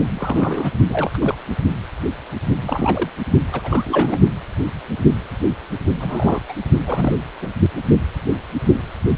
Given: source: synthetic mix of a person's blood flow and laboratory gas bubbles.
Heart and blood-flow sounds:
Doppler ultrasound of blood flow; precordium
0.09-0.71 s: bubbles
0.88-1.10 s: bubbles
1.14-1.17 s: bubbles
1.20-1.34 s: bubbles
2.60-3.10 s: bubbles
3.52-4.21 s: bubbles
6.00-6.42 s: bubbles
6.49-6.54 s: bubbles
6.85-7.25 s: bubbles
7.42-7.49 s: bubbles
From the record:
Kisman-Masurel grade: 232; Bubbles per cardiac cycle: several, 3 to 8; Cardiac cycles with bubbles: 50 to 99%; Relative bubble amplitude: moderate (0.250 to 0.450); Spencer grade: 3 (all of the cardiac periods contain showers or single bubble signals, but not dominating or overriding the cardiac motion signals); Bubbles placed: only in the low amplitude regions of the cardiac cycle

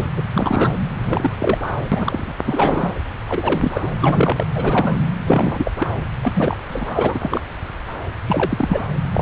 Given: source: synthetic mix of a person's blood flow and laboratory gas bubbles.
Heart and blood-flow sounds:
Doppler ultrasound of blood flow; subclavian vein
0.00-0.07 s: bubbles
0.16-0.22 s: bubbles
0.34-0.71 s: bubbles
1.03-1.58 s: bubbles
1.92-2.35 s: bubbles
2.45-2.93 s: bubbles
3.28-3.89 s: bubbles
4.01-4.45 s: bubbles
4.56-5.00 s: bubbles
5.26-5.71 s: bubbles
5.79-5.88 s: bubbles
6.23-6.58 s: bubbles
6.68-7.41 s: bubbles
8.27-8.86 s: bubbles
9.13-9.22 s: bubbles
From the record:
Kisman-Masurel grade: 333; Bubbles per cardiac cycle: rolling drumbeat, 9 or more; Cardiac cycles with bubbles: 50 to 99%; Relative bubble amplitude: loud (0.450 to 0.775); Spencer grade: 3 (all of the cardiac periods contain showers or single bubble signals, but not dominating or overriding the cardiac motion signals); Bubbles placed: anywhere in the cardiac cycle

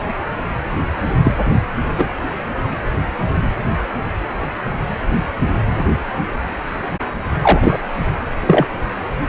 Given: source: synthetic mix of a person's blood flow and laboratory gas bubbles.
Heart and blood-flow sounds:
Doppler ultrasound of blood flow; precordium
1.23-1.32 s: bubbles
1.98-2.14 s: bubbles
7.42-7.77 s: bubbles
8.46-8.66 s: bubbles
From the record:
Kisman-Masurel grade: 123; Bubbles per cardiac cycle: 1 to 2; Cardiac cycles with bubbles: 10 to 50%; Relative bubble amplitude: loud (0.450 to 0.775); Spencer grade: 2 (many but less than half of the cardiac periods contain bubble signals, singularly or in groups); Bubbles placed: anywhere in the cardiac cycle

